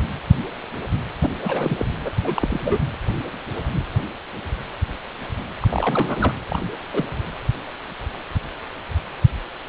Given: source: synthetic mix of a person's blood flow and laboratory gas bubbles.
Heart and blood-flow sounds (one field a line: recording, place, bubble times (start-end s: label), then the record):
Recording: Doppler ultrasound of blood flow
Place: precordium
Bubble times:
1.20-1.30 s: bubbles
1.42-1.85 s: bubbles
2.04-2.10 s: bubbles
2.23-2.60 s: bubbles
2.63-2.79 s: bubbles
5.62-5.67 s: bubbles
5.70-6.33 s: bubbles
6.50-6.62 s: bubbles
6.93-7.04 s: bubbles
From the record:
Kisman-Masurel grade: 222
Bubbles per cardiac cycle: several, 3 to 8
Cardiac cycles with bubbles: 10 to 50%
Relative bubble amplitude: moderate (0.250 to 0.450)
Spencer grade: 2 (many but less than half of the cardiac periods contain bubble signals, singularly or in groups)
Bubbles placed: anywhere in the cardiac cycle